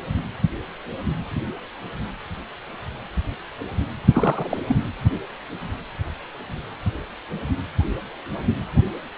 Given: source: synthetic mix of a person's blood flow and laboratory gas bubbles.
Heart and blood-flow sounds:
Doppler ultrasound of blood flow; precordium
4.12-4.62 s: bubbles
4.69-4.77 s: bubbles
From the record:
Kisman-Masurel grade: 212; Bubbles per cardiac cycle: several, 3 to 8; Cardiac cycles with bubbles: 1 to 10%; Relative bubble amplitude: moderate (0.250 to 0.450); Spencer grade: 1 (occasional bubble signal discernible with the cardiac motion signal, with majority of cardiac periods free of bubbles); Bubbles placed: anywhere in the cardiac cycle

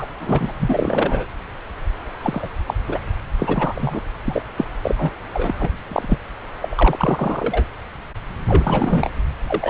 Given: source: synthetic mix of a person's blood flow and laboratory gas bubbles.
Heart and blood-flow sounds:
Doppler ultrasound of blood flow; subclavian vein
0.00-0.07 s: bubbles
0.20-0.53 s: bubbles
0.59-1.26 s: bubbles
2.22-2.49 s: bubbles
2.66-2.74 s: bubbles
2.88-2.98 s: bubbles
3.39-4.01 s: bubbles
4.25-4.42 s: bubbles
4.57-4.65 s: bubbles
4.82-5.13 s: bubbles
5.33-5.52 s: bubbles
5.59-5.71 s: bubbles
5.86-6.20 s: bubbles
6.62-7.64 s: bubbles
8.47-9.11 s: bubbles
9.48-9.70 s: bubbles
From the record:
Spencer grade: 3 (all of the cardiac periods contain showers or single bubble signals, but not dominating or overriding the cardiac motion signals); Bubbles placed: anywhere in the cardiac cycle

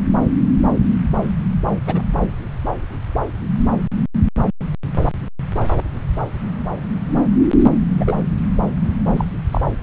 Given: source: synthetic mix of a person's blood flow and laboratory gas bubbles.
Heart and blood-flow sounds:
Doppler ultrasound of blood flow; subclavian vein
1.86-2.02 s: bubbles
7.98-8.23 s: bubbles
9.17-9.25 s: bubbles
9.52-9.62 s: bubbles
From the record:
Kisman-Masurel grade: 122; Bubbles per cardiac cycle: 1 to 2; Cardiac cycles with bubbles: 10 to 50%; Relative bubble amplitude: moderate (0.250 to 0.450); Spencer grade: 2 (many but less than half of the cardiac periods contain bubble signals, singularly or in groups); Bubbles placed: anywhere in the cardiac cycle

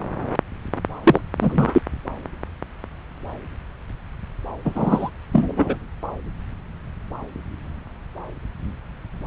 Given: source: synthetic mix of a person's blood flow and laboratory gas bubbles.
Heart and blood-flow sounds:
Doppler ultrasound of blood flow; subclavian vein
1.03-1.21 s: bubbles
1.41-1.81 s: bubbles
4.64-5.10 s: bubbles
5.32-5.77 s: bubbles
From the record:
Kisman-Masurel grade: 223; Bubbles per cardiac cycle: several, 3 to 8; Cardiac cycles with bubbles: 10 to 50%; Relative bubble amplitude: loud (0.450 to 0.775); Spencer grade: 2 (many but less than half of the cardiac periods contain bubble signals, singularly or in groups); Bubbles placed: anywhere in the cardiac cycle

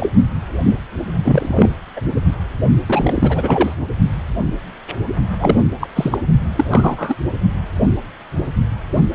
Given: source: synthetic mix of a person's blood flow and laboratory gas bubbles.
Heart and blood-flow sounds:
Doppler ultrasound of blood flow; precordium
0.00-0.09 s: bubbles
0.65-0.76 s: bubbles
1.23-1.70 s: bubbles
1.96-2.00 s: bubbles
2.87-3.75 s: bubbles
5.40-5.63 s: bubbles
5.80-5.88 s: bubbles
5.96-6.18 s: bubbles
6.55-6.64 s: bubbles
6.71-7.15 s: bubbles
From the record:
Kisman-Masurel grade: 233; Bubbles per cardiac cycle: several, 3 to 8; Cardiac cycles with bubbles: 50 to 99%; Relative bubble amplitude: loud (0.450 to 0.775); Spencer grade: 3 (all of the cardiac periods contain showers or single bubble signals, but not dominating or overriding the cardiac motion signals); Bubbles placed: only in the low amplitude regions of the cardiac cycle

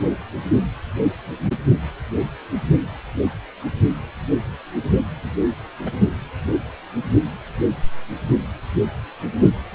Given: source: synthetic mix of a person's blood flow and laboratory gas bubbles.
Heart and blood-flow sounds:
Doppler ultrasound of blood flow; precordium
5.78-5.91 s: bubbles
From the record:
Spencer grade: 1 (occasional bubble signal discernible with the cardiac motion signal, with majority of cardiac periods free of bubbles); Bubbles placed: only in the low amplitude regions of the cardiac cycle

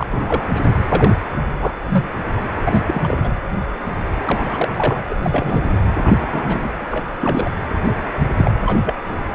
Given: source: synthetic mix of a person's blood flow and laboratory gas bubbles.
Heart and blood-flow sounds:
Doppler ultrasound of blood flow; precordium
0.00-0.07 s: bubbles
0.11-0.44 s: bubbles
0.55-0.61 s: bubbles
0.64-0.74 s: bubbles
0.89-1.14 s: bubbles
1.58-1.74 s: bubbles
1.85-2.08 s: bubbles
2.64-3.17 s: bubbles
3.23-3.29 s: bubbles
4.25-5.05 s: bubbles
5.10-5.15 s: bubbles
5.22-5.83 s: bubbles
6.03-6.42 s: bubbles
6.49-6.72 s: bubbles
6.79-7.08 s: bubbles
7.20-7.50 s: bubbles
7.83-7.94 s: bubbles
8.34-8.51 s: bubbles
8.65-8.81 s: bubbles
8.84-8.94 s: bubbles
9.12-9.20 s: bubbles
From the record:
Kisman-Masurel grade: 232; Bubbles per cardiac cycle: several, 3 to 8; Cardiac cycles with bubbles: 50 to 99%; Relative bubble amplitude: moderate (0.250 to 0.450); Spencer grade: 3 (all of the cardiac periods contain showers or single bubble signals, but not dominating or overriding the cardiac motion signals); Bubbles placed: anywhere in the cardiac cycle

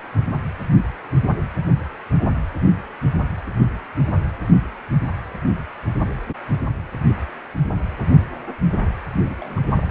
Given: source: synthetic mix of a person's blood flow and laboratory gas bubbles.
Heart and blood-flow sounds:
Doppler ultrasound of blood flow; precordium
9.25-9.35 s: bubbles
9.40-9.61 s: bubbles
9.63-9.67 s: bubbles
9.75-9.88 s: bubbles
From the record:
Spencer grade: 2 (many but less than half of the cardiac periods contain bubble signals, singularly or in groups); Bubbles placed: anywhere in the cardiac cycle

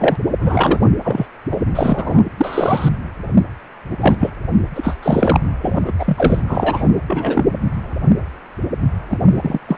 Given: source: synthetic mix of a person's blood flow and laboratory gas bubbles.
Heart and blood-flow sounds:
Doppler ultrasound of blood flow; precordium
0.00-0.17 s: bubbles
0.40-0.80 s: bubbles
1.04-1.27 s: bubbles
1.51-1.57 s: bubbles
1.75-2.23 s: bubbles
2.37-2.89 s: bubbles
4.00-4.30 s: bubbles
4.75-4.96 s: bubbles
5.02-5.38 s: bubbles
5.62-5.92 s: bubbles
5.99-6.42 s: bubbles
6.46-6.88 s: bubbles
7.06-7.45 s: bubbles
9.08-9.19 s: bubbles
9.30-9.59 s: bubbles
9.68-9.77 s: bubbles
From the record:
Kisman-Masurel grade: 233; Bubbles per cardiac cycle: several, 3 to 8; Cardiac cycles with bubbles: 50 to 99%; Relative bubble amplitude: loud (0.450 to 0.775); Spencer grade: 3 (all of the cardiac periods contain showers or single bubble signals, but not dominating or overriding the cardiac motion signals); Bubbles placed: anywhere in the cardiac cycle

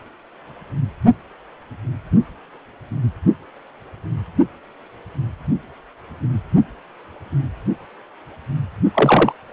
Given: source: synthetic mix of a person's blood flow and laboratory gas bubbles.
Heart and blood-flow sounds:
Doppler ultrasound of blood flow; precordium
8.94-9.33 s: bubbles
From the record:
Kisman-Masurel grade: 113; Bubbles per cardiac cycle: 1 to 2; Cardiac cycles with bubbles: 1 to 10%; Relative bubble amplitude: loud (0.450 to 0.775); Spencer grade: 1 (occasional bubble signal discernible with the cardiac motion signal, with majority of cardiac periods free of bubbles); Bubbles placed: only in the low amplitude regions of the cardiac cycle

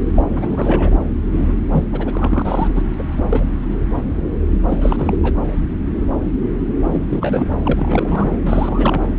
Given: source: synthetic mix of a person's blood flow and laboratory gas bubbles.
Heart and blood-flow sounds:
Doppler ultrasound of blood flow; subclavian vein
0.15-0.23 s: bubbles
0.34-0.98 s: bubbles
1.31-1.53 s: bubbles
1.72-1.84 s: bubbles
1.92-2.69 s: bubbles
2.75-2.82 s: bubbles
2.98-3.02 s: bubbles
3.17-3.23 s: bubbles
3.30-3.46 s: bubbles
4.69-5.18 s: bubbles
5.23-5.34 s: bubbles
6.91-7.04 s: bubbles
7.09-7.47 s: bubbles
7.64-8.29 s: bubbles
8.44-9.02 s: bubbles
From the record:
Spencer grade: 3 (all of the cardiac periods contain showers or single bubble signals, but not dominating or overriding the cardiac motion signals); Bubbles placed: anywhere in the cardiac cycle

